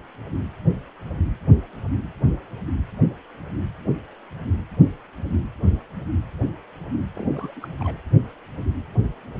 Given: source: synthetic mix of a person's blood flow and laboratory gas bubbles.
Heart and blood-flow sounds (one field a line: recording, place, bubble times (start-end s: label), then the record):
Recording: Doppler ultrasound of blood flow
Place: precordium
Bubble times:
7.14-7.27 s: bubbles
7.33-7.53 s: bubbles
7.56-7.68 s: bubbles
7.79-7.96 s: bubbles
From the record:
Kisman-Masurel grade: 211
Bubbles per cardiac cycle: several, 3 to 8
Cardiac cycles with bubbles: 1 to 10%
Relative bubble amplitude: barely perceptible (0.100 to 0.250)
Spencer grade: 1 (occasional bubble signal discernible with the cardiac motion signal, with majority of cardiac periods free of bubbles)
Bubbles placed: anywhere in the cardiac cycle